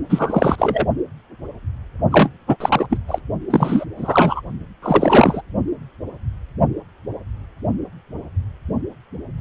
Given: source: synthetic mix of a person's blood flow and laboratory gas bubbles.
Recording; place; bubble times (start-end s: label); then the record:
Doppler ultrasound of blood flow; precordium
0.09-0.56 s: bubbles
0.58-0.86 s: bubbles
2.10-2.29 s: bubbles
2.47-2.56 s: bubbles
2.60-2.86 s: bubbles
2.89-2.98 s: bubbles
3.08-3.22 s: bubbles
3.50-3.85 s: bubbles
3.96-4.41 s: bubbles
4.82-5.42 s: bubbles
From the record:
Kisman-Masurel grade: 333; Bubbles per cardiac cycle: rolling drumbeat, 9 or more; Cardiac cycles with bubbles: 50 to 99%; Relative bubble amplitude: loud (0.450 to 0.775); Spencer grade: 3 (all of the cardiac periods contain showers or single bubble signals, but not dominating or overriding the cardiac motion signals); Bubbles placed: only in the low amplitude regions of the cardiac cycle